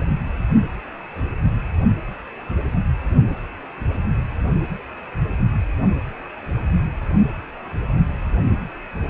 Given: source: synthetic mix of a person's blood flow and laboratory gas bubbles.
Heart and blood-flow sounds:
Doppler ultrasound of blood flow; precordium
no bubbles
From the record:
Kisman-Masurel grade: 000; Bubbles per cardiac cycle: 0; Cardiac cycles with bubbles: 0%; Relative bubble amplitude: no bubbles discernible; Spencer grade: 0 (complete lack of bubble signals)

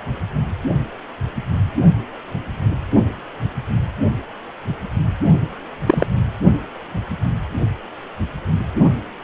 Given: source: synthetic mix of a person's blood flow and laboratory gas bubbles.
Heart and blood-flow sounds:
Doppler ultrasound of blood flow; precordium
5.86-6.06 s: bubbles
From the record:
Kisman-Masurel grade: 123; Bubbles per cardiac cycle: 1 to 2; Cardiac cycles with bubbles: 10 to 50%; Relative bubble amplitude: loud (0.450 to 0.775); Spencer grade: 2 (many but less than half of the cardiac periods contain bubble signals, singularly or in groups); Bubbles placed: only in the low amplitude regions of the cardiac cycle

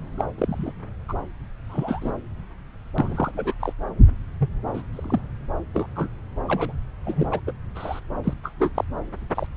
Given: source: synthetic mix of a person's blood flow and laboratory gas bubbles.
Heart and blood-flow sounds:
Doppler ultrasound of blood flow; subclavian vein
0.17-0.24 s: bubbles
0.38-0.72 s: bubbles
1.08-1.14 s: bubbles
1.69-2.12 s: bubbles
2.98-3.31 s: bubbles
3.34-3.54 s: bubbles
3.60-3.73 s: bubbles
4.39-4.49 s: bubbles
4.74-4.83 s: bubbles
4.93-5.22 s: bubbles
5.74-5.88 s: bubbles
5.96-6.08 s: bubbles
6.48-6.73 s: bubbles
7.04-7.26 s: bubbles
7.31-7.41 s: bubbles
7.47-7.52 s: bubbles
7.75-8.00 s: bubbles
8.23-8.33 s: bubbles
8.43-8.52 s: bubbles
8.59-8.84 s: bubbles
9.34-9.47 s: bubbles
From the record:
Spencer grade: 3 (all of the cardiac periods contain showers or single bubble signals, but not dominating or overriding the cardiac motion signals); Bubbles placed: anywhere in the cardiac cycle

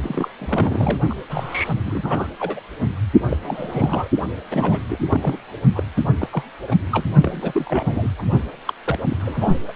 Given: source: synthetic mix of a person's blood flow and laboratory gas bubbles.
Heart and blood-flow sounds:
Doppler ultrasound of blood flow; precordium
0.03-0.28 s: bubbles
0.38-0.97 s: bubbles
1.09-1.14 s: bubbles
1.29-1.74 s: bubbles
1.85-2.26 s: bubbles
2.40-2.60 s: bubbles
3.30-3.37 s: bubbles
3.42-4.08 s: bubbles
4.51-4.83 s: bubbles
4.89-5.07 s: bubbles
5.09-5.37 s: bubbles
5.75-5.83 s: bubbles
5.96-6.00 s: bubbles
6.19-6.28 s: bubbles
6.31-6.43 s: bubbles
6.62-6.77 s: bubbles
6.92-7.05 s: bubbles
7.23-8.09 s: bubbles
8.19-8.22 s: bubbles
8.65-8.73 s: bubbles
8.84-8.98 s: bubbles
9.07-9.16 s: bubbles
9.20-9.59 s: bubbles
9.67-9.73 s: bubbles
From the record:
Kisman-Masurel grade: 332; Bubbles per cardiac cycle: rolling drumbeat, 9 or more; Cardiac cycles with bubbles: 50 to 99%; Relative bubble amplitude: moderate (0.250 to 0.450); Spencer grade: 3 (all of the cardiac periods contain showers or single bubble signals, but not dominating or overriding the cardiac motion signals); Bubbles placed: only in the low amplitude regions of the cardiac cycle

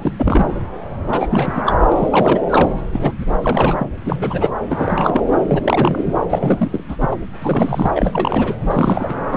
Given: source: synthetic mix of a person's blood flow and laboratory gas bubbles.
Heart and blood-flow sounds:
Doppler ultrasound of blood flow; subclavian vein
0.00-0.11 s: bubbles
0.17-0.46 s: bubbles
1.06-1.27 s: bubbles
1.30-1.74 s: bubbles
1.91-2.40 s: bubbles
2.49-2.73 s: bubbles
2.92-3.13 s: bubbles
3.20-3.25 s: bubbles
3.41-3.90 s: bubbles
4.06-4.53 s: bubbles
4.69-5.23 s: bubbles
5.48-6.05 s: bubbles
6.29-6.83 s: bubbles
6.88-6.96 s: bubbles
7.00-7.08 s: bubbles
7.11-7.16 s: bubbles
7.39-7.91 s: bubbles
7.94-8.57 s: bubbles
8.70-9.37 s: bubbles
From the record:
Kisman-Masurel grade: 342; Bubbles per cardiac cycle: rolling drumbeat, 9 or more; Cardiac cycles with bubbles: 100%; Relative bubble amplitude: moderate (0.250 to 0.450); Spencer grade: 3 (all of the cardiac periods contain showers or single bubble signals, but not dominating or overriding the cardiac motion signals); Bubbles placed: anywhere in the cardiac cycle

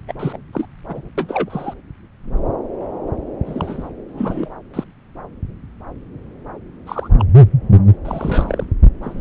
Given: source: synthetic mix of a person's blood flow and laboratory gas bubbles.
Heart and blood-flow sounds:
Doppler ultrasound of blood flow; subclavian vein
0.08-0.13 s: bubbles
0.19-0.37 s: bubbles
0.52-0.66 s: bubbles
0.87-1.08 s: bubbles
1.18-1.74 s: bubbles
3.46-3.89 s: bubbles
4.08-4.49 s: bubbles
4.73-4.84 s: bubbles
6.86-7.09 s: bubbles
7.18-7.25 s: bubbles
8.05-8.66 s: bubbles
9.02-9.21 s: bubbles
From the record:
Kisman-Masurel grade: 232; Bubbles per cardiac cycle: several, 3 to 8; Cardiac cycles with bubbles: 50 to 99%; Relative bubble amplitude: moderate (0.250 to 0.450); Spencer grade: 3 (all of the cardiac periods contain showers or single bubble signals, but not dominating or overriding the cardiac motion signals); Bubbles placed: anywhere in the cardiac cycle

